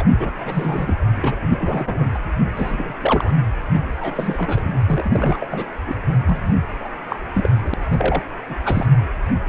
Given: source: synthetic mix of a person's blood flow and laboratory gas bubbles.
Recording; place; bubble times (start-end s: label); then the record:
Doppler ultrasound of blood flow; precordium
0.00-0.03 s: bubbles
0.19-0.30 s: bubbles
0.39-0.97 s: bubbles
1.17-1.35 s: bubbles
1.42-1.47 s: bubbles
1.51-2.21 s: bubbles
2.54-2.93 s: bubbles
2.97-3.32 s: bubbles
3.73-3.80 s: bubbles
3.93-4.76 s: bubbles
4.85-5.46 s: bubbles
5.50-5.67 s: bubbles
5.85-5.95 s: bubbles
6.26-6.54 s: bubbles
6.79-6.89 s: bubbles
7.09-7.16 s: bubbles
7.33-7.50 s: bubbles
7.61-7.74 s: bubbles
7.91-8.21 s: bubbles
8.50-8.55 s: bubbles
8.65-8.86 s: bubbles
From the record:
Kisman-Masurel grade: 232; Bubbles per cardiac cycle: several, 3 to 8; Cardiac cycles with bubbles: 50 to 99%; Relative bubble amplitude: moderate (0.250 to 0.450); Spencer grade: 3 (all of the cardiac periods contain showers or single bubble signals, but not dominating or overriding the cardiac motion signals); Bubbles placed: anywhere in the cardiac cycle